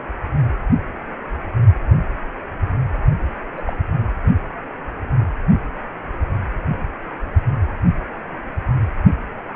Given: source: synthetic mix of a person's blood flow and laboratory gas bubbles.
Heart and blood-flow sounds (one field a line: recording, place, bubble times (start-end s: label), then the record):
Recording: Doppler ultrasound of blood flow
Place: precordium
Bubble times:
3.57-3.61 s: bubbles
3.67-3.77 s: bubbles
From the record:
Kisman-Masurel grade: 111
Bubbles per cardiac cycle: 1 to 2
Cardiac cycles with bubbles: 1 to 10%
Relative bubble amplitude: barely perceptible (0.100 to 0.250)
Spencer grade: 1 (occasional bubble signal discernible with the cardiac motion signal, with majority of cardiac periods free of bubbles)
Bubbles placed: anywhere in the cardiac cycle